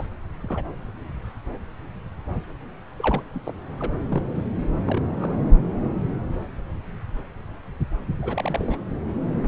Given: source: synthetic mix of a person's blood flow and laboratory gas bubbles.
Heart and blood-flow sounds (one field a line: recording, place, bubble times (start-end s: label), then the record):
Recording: Doppler ultrasound of blood flow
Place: subclavian vein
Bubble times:
0.00-0.07 s: bubbles
0.42-0.64 s: bubbles
2.99-3.22 s: bubbles
3.34-3.40 s: bubbles
3.45-3.54 s: bubbles
3.77-3.93 s: bubbles
4.08-4.22 s: bubbles
4.34-4.47 s: bubbles
4.85-5.03 s: bubbles
5.19-5.36 s: bubbles
8.21-8.77 s: bubbles
From the record:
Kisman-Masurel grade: 221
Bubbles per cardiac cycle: several, 3 to 8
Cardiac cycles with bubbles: 10 to 50%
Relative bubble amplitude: barely perceptible (0.100 to 0.250)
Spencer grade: 2 (many but less than half of the cardiac periods contain bubble signals, singularly or in groups)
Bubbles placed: anywhere in the cardiac cycle